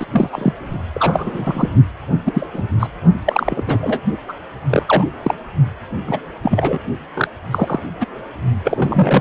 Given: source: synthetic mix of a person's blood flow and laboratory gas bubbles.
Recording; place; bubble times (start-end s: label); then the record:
Doppler ultrasound of blood flow; precordium
0.00-0.06 s: bubbles
0.11-0.30 s: bubbles
0.33-0.52 s: bubbles
0.94-1.69 s: bubbles
2.25-2.47 s: bubbles
2.54-2.62 s: bubbles
2.79-2.87 s: bubbles
3.25-3.64 s: bubbles
3.67-3.78 s: bubbles
3.81-4.00 s: bubbles
4.29-4.33 s: bubbles
4.70-4.83 s: bubbles
4.86-5.05 s: bubbles
5.23-5.35 s: bubbles
6.07-6.20 s: bubbles
6.42-6.79 s: bubbles
7.15-7.28 s: bubbles
7.51-7.80 s: bubbles
8.00-8.06 s: bubbles
8.64-9.21 s: bubbles
From the record:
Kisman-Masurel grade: 233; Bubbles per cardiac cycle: several, 3 to 8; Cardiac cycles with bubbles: 50 to 99%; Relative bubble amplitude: loud (0.450 to 0.775); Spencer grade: 3 (all of the cardiac periods contain showers or single bubble signals, but not dominating or overriding the cardiac motion signals); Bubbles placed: only in the low amplitude regions of the cardiac cycle